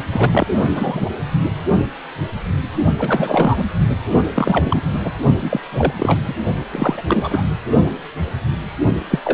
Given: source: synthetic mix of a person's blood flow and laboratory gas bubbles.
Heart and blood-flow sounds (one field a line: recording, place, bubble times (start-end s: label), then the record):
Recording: Doppler ultrasound of blood flow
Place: precordium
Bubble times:
0.12-0.47 s: bubbles
0.58-1.09 s: bubbles
2.98-3.65 s: bubbles
4.35-5.00 s: bubbles
5.03-5.11 s: bubbles
5.40-5.61 s: bubbles
5.71-5.93 s: bubbles
5.97-6.21 s: bubbles
6.28-6.33 s: bubbles
6.71-7.44 s: bubbles
9.10-9.19 s: bubbles
9.25-9.34 s: bubbles
From the record:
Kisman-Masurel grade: 332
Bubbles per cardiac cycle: rolling drumbeat, 9 or more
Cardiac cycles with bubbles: 50 to 99%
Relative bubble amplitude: moderate (0.250 to 0.450)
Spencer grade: 3 (all of the cardiac periods contain showers or single bubble signals, but not dominating or overriding the cardiac motion signals)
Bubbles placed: only in the low amplitude regions of the cardiac cycle